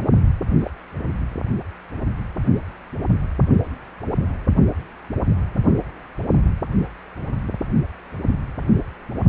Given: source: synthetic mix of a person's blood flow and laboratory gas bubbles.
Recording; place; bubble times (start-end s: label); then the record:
Doppler ultrasound of blood flow; precordium
0.60-0.70 s: bubbles
From the record:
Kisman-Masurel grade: 111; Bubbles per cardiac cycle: 1 to 2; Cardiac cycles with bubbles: 1 to 10%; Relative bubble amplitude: barely perceptible (0.100 to 0.250); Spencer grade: 1 (occasional bubble signal discernible with the cardiac motion signal, with majority of cardiac periods free of bubbles); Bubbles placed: anywhere in the cardiac cycle